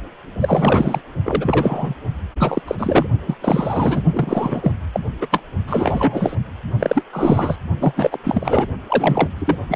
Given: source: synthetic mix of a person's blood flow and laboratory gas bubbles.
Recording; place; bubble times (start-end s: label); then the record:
Doppler ultrasound of blood flow; precordium
0.40-1.01 s: bubbles
1.25-1.95 s: bubbles
2.38-2.62 s: bubbles
2.67-2.76 s: bubbles
2.78-3.08 s: bubbles
3.27-3.35 s: bubbles
3.42-4.03 s: bubbles
4.11-4.72 s: bubbles
4.93-5.00 s: bubbles
5.21-5.27 s: bubbles
5.31-5.42 s: bubbles
5.67-6.36 s: bubbles
6.79-7.04 s: bubbles
7.12-7.56 s: bubbles
7.81-7.94 s: bubbles
7.96-8.19 s: bubbles
8.23-8.67 s: bubbles
8.89-9.29 s: bubbles
9.38-9.56 s: bubbles
9.68-9.76 s: bubbles
From the record:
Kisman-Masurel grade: 343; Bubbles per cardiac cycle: rolling drumbeat, 9 or more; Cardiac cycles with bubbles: 100%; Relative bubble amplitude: loud (0.450 to 0.775); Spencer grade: 3 (all of the cardiac periods contain showers or single bubble signals, but not dominating or overriding the cardiac motion signals); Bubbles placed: only in the low amplitude regions of the cardiac cycle